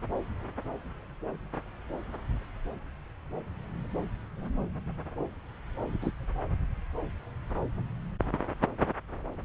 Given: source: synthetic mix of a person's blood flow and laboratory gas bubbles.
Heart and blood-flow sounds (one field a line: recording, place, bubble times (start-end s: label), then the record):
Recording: Doppler ultrasound of blood flow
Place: subclavian vein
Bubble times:
6.01-6.10 s: bubbles
From the record:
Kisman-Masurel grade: 121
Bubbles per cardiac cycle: 1 to 2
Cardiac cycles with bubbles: 10 to 50%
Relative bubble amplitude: barely perceptible (0.100 to 0.250)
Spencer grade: 2 (many but less than half of the cardiac periods contain bubble signals, singularly or in groups)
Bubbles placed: anywhere in the cardiac cycle